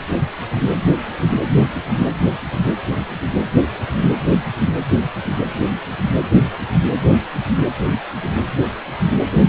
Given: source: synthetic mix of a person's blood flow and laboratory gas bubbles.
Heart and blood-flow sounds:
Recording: Doppler ultrasound of blood flow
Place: precordium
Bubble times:
no bubbles
From the record:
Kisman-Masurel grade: 000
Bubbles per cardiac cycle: 0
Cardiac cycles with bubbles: 0%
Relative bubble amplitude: no bubbles discernible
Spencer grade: 0 (complete lack of bubble signals)

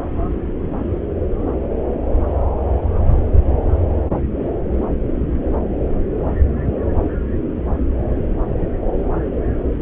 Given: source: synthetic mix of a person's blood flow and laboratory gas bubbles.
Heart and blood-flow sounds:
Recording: Doppler ultrasound of blood flow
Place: subclavian vein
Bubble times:
no bubbles
From the record:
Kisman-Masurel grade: 000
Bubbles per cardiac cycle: 0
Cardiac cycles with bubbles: 0%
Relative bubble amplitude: no bubbles discernible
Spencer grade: 0 (complete lack of bubble signals)

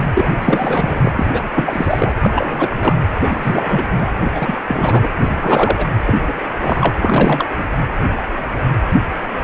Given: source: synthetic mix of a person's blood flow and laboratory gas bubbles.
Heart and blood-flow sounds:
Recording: Doppler ultrasound of blood flow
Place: precordium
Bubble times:
0.14-1.12 s: bubbles
1.16-1.45 s: bubbles
1.56-2.12 s: bubbles
2.21-2.95 s: bubbles
3.22-3.87 s: bubbles
3.98-4.11 s: bubbles
4.35-4.57 s: bubbles
4.68-5.08 s: bubbles
5.19-5.87 s: bubbles
6.06-6.17 s: bubbles
6.27-6.33 s: bubbles
6.56-6.97 s: bubbles
7.02-7.48 s: bubbles
7.58-7.64 s: bubbles
From the record:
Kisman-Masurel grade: 332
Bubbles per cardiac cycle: rolling drumbeat, 9 or more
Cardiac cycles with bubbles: 50 to 99%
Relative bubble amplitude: moderate (0.250 to 0.450)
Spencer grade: 3 (all of the cardiac periods contain showers or single bubble signals, but not dominating or overriding the cardiac motion signals)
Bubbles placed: anywhere in the cardiac cycle

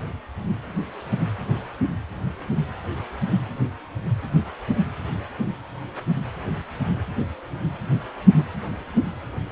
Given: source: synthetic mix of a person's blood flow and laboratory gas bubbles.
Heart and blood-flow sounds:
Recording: Doppler ultrasound of blood flow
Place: precordium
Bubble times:
8.38-8.44 s: bubbles
From the record:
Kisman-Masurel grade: 121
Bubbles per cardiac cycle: 1 to 2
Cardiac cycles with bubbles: 10 to 50%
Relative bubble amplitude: barely perceptible (0.100 to 0.250)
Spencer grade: 2 (many but less than half of the cardiac periods contain bubble signals, singularly or in groups)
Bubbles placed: anywhere in the cardiac cycle

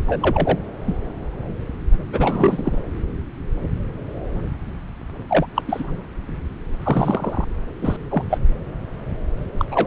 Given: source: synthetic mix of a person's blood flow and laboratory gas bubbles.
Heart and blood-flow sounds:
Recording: Doppler ultrasound of blood flow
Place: subclavian vein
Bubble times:
0.07-0.59 s: bubbles
0.86-0.95 s: bubbles
2.12-2.79 s: bubbles
5.29-5.46 s: bubbles
5.55-5.62 s: bubbles
5.67-5.96 s: bubbles
6.83-7.45 s: bubbles
7.81-7.96 s: bubbles
8.11-8.24 s: bubbles
8.29-8.38 s: bubbles
9.57-9.65 s: bubbles
9.71-9.87 s: bubbles
From the record:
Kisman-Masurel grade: 222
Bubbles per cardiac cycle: several, 3 to 8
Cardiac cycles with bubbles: 10 to 50%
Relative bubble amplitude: moderate (0.250 to 0.450)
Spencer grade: 2 (many but less than half of the cardiac periods contain bubble signals, singularly or in groups)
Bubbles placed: anywhere in the cardiac cycle

